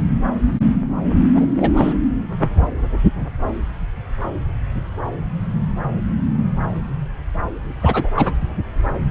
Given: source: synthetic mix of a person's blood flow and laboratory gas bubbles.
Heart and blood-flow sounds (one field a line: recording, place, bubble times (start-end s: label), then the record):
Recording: Doppler ultrasound of blood flow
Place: subclavian vein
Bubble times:
1.34-1.54 s: bubbles
1.60-1.71 s: bubbles
1.76-1.94 s: bubbles
7.81-8.10 s: bubbles
8.15-8.33 s: bubbles
From the record:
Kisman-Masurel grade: 222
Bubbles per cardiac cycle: several, 3 to 8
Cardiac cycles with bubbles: 10 to 50%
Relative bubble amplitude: moderate (0.250 to 0.450)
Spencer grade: 2 (many but less than half of the cardiac periods contain bubble signals, singularly or in groups)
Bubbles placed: anywhere in the cardiac cycle